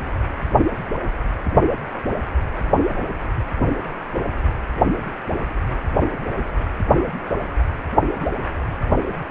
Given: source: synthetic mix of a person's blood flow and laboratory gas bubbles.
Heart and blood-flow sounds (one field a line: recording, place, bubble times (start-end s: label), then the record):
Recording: Doppler ultrasound of blood flow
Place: precordium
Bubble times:
no bubbles
From the record:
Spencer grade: 0 (complete lack of bubble signals)